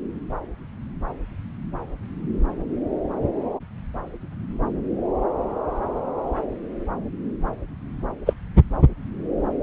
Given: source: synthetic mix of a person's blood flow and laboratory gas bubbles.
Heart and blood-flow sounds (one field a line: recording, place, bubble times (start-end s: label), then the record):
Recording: Doppler ultrasound of blood flow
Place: subclavian vein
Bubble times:
8.26-8.33 s: bubbles
From the record:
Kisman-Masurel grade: 113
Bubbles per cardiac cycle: 1 to 2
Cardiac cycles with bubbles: 1 to 10%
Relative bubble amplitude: loud (0.450 to 0.775)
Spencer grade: 1 (occasional bubble signal discernible with the cardiac motion signal, with majority of cardiac periods free of bubbles)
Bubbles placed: anywhere in the cardiac cycle